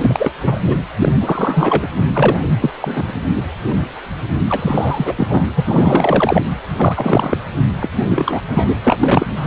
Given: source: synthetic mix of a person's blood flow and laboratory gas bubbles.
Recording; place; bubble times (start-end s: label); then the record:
Doppler ultrasound of blood flow; precordium
0.00-0.31 s: bubbles
0.43-0.60 s: bubbles
0.66-0.76 s: bubbles
0.96-1.13 s: bubbles
1.20-1.88 s: bubbles
2.13-2.40 s: bubbles
2.60-2.70 s: bubbles
2.80-3.13 s: bubbles
3.36-3.43 s: bubbles
4.50-5.13 s: bubbles
5.17-5.45 s: bubbles
5.55-6.42 s: bubbles
6.76-7.38 s: bubbles
7.81-7.89 s: bubbles
7.96-8.43 s: bubbles
8.51-8.76 s: bubbles
8.83-8.96 s: bubbles
9.00-9.47 s: bubbles
From the record:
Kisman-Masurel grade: 333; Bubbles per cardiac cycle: rolling drumbeat, 9 or more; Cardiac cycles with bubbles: 50 to 99%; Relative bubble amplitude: loud (0.450 to 0.775); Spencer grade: 3 (all of the cardiac periods contain showers or single bubble signals, but not dominating or overriding the cardiac motion signals); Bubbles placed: anywhere in the cardiac cycle